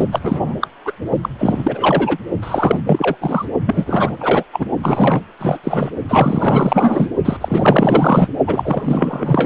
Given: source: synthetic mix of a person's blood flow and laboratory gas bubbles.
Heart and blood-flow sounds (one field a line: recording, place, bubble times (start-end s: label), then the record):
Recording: Doppler ultrasound of blood flow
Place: precordium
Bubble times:
0.00-0.05 s: bubbles
0.12-0.55 s: bubbles
0.60-0.67 s: bubbles
0.85-0.93 s: bubbles
1.22-1.29 s: bubbles
1.38-2.17 s: bubbles
2.42-2.81 s: bubbles
2.86-3.15 s: bubbles
3.21-3.46 s: bubbles
3.66-4.44 s: bubbles
4.52-4.66 s: bubbles
4.83-5.21 s: bubbles
5.40-5.58 s: bubbles
5.64-5.91 s: bubbles
6.08-7.08 s: bubbles
7.25-7.37 s: bubbles
7.41-8.28 s: bubbles
8.46-9.46 s: bubbles
From the record:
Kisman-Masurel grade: 444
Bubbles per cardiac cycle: continuous sound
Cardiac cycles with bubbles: 100%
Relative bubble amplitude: maximal (0.775 to 0.999)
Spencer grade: 4 (maximum detectable bubble signal sounding continuously throughout systole and diastole of every cardiac period, and overriding the amplitude of the normal cardiac signals)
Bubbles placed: only in the low amplitude regions of the cardiac cycle